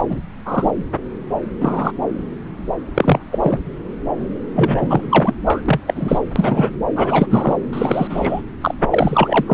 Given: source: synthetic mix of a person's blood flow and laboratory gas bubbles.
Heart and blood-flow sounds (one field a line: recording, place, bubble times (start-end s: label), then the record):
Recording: Doppler ultrasound of blood flow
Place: subclavian vein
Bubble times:
0.00-0.03 s: bubbles
0.09-0.20 s: bubbles
0.45-0.71 s: bubbles
1.60-1.92 s: bubbles
2.94-3.19 s: bubbles
3.31-3.59 s: bubbles
4.55-5.35 s: bubbles
5.46-5.62 s: bubbles
5.66-5.80 s: bubbles
5.87-6.21 s: bubbles
6.36-6.71 s: bubbles
6.95-7.27 s: bubbles
7.30-7.57 s: bubbles
7.73-8.41 s: bubbles
8.61-8.74 s: bubbles
8.91-9.43 s: bubbles
9.47-9.54 s: bubbles
From the record:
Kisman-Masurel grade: 233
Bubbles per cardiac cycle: several, 3 to 8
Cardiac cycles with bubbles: 50 to 99%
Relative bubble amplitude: loud (0.450 to 0.775)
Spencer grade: 3 (all of the cardiac periods contain showers or single bubble signals, but not dominating or overriding the cardiac motion signals)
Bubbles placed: anywhere in the cardiac cycle